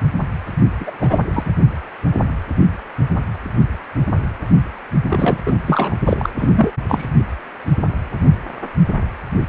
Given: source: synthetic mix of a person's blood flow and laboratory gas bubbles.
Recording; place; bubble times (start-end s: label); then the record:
Doppler ultrasound of blood flow; precordium
0.80-0.91 s: bubbles
0.99-1.24 s: bubbles
1.33-1.51 s: bubbles
5.09-5.39 s: bubbles
5.46-5.61 s: bubbles
5.67-5.95 s: bubbles
6.05-6.29 s: bubbles
6.38-6.50 s: bubbles
6.55-6.71 s: bubbles
6.88-7.12 s: bubbles
From the record:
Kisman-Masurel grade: 223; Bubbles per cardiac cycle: several, 3 to 8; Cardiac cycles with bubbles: 10 to 50%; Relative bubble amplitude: loud (0.450 to 0.775); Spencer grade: 2 (many but less than half of the cardiac periods contain bubble signals, singularly or in groups); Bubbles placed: only in the low amplitude regions of the cardiac cycle